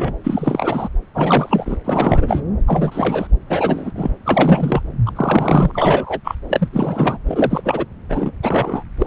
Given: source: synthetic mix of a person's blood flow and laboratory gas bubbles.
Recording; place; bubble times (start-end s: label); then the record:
Doppler ultrasound of blood flow; subclavian vein
0.00-0.15 s: bubbles
0.23-0.89 s: bubbles
1.15-1.76 s: bubbles
1.84-2.42 s: bubbles
2.67-3.27 s: bubbles
3.50-3.92 s: bubbles
3.95-4.10 s: bubbles
4.25-4.81 s: bubbles
5.05-5.12 s: bubbles
5.15-5.71 s: bubbles
5.74-6.20 s: bubbles
6.24-6.35 s: bubbles
6.49-6.68 s: bubbles
6.72-7.17 s: bubbles
7.26-7.86 s: bubbles
8.09-8.31 s: bubbles
8.42-8.83 s: bubbles
8.98-9.07 s: bubbles
From the record:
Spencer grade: 3 (all of the cardiac periods contain showers or single bubble signals, but not dominating or overriding the cardiac motion signals); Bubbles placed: anywhere in the cardiac cycle